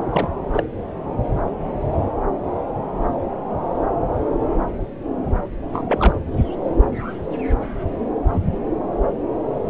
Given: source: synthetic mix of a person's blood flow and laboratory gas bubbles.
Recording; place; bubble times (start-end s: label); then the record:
Doppler ultrasound of blood flow; subclavian vein
0.11-0.28 s: bubbles
0.54-0.63 s: bubbles
5.74-5.84 s: bubbles
5.88-6.16 s: bubbles
From the record:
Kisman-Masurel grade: 212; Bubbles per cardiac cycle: several, 3 to 8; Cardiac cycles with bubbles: 1 to 10%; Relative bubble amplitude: moderate (0.250 to 0.450); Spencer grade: 1 (occasional bubble signal discernible with the cardiac motion signal, with majority of cardiac periods free of bubbles); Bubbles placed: anywhere in the cardiac cycle